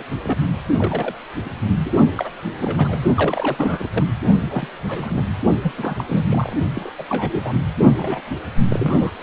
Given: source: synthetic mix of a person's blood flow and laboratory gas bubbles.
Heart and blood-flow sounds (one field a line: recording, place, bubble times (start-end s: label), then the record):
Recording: Doppler ultrasound of blood flow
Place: precordium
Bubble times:
0.00-0.03 s: bubbles
0.22-0.38 s: bubbles
0.78-1.15 s: bubbles
1.45-1.49 s: bubbles
1.84-1.93 s: bubbles
2.17-2.29 s: bubbles
2.43-3.00 s: bubbles
3.15-3.88 s: bubbles
3.93-4.04 s: bubbles
4.42-4.78 s: bubbles
4.87-5.24 s: bubbles
5.62-5.74 s: bubbles
5.77-5.95 s: bubbles
5.98-6.04 s: bubbles
6.07-6.25 s: bubbles
6.29-6.53 s: bubbles
6.75-6.90 s: bubbles
6.98-7.05 s: bubbles
7.09-7.54 s: bubbles
7.97-8.21 s: bubbles
8.70-9.22 s: bubbles
From the record:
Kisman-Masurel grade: 242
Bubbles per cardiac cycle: several, 3 to 8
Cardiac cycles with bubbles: 100%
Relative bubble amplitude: moderate (0.250 to 0.450)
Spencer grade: 3 (all of the cardiac periods contain showers or single bubble signals, but not dominating or overriding the cardiac motion signals)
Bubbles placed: only in the low amplitude regions of the cardiac cycle